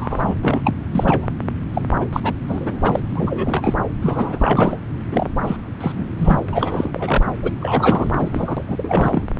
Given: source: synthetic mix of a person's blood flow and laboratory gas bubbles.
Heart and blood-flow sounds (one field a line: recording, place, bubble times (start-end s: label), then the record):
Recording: Doppler ultrasound of blood flow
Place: subclavian vein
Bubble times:
0.00-0.36 s: bubbles
0.41-0.73 s: bubbles
0.93-1.26 s: bubbles
1.73-1.81 s: bubbles
2.00-2.06 s: bubbles
2.12-2.33 s: bubbles
2.48-3.00 s: bubbles
3.15-3.73 s: bubbles
4.01-4.78 s: bubbles
5.12-5.29 s: bubbles
5.44-5.57 s: bubbles
5.80-6.07 s: bubbles
6.17-6.40 s: bubbles
6.48-7.23 s: bubbles
7.43-7.52 s: bubbles
7.60-8.63 s: bubbles
8.68-9.23 s: bubbles
From the record:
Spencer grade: 3 (all of the cardiac periods contain showers or single bubble signals, but not dominating or overriding the cardiac motion signals)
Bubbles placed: anywhere in the cardiac cycle